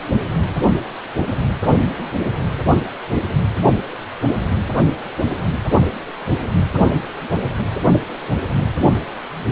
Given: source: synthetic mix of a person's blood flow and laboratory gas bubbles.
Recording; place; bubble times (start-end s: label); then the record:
Doppler ultrasound of blood flow; precordium
no bubbles
From the record:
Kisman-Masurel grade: 000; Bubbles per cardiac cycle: 0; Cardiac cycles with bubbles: 0%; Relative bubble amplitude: no bubbles discernible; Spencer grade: 0 (complete lack of bubble signals)